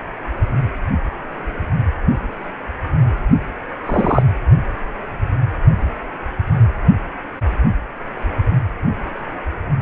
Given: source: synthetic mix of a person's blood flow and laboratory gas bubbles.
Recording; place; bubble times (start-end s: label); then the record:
Doppler ultrasound of blood flow; precordium
3.86-4.23 s: bubbles
From the record:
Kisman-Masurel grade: 123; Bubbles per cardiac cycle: 1 to 2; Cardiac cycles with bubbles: 10 to 50%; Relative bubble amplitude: loud (0.450 to 0.775); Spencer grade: 2 (many but less than half of the cardiac periods contain bubble signals, singularly or in groups); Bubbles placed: anywhere in the cardiac cycle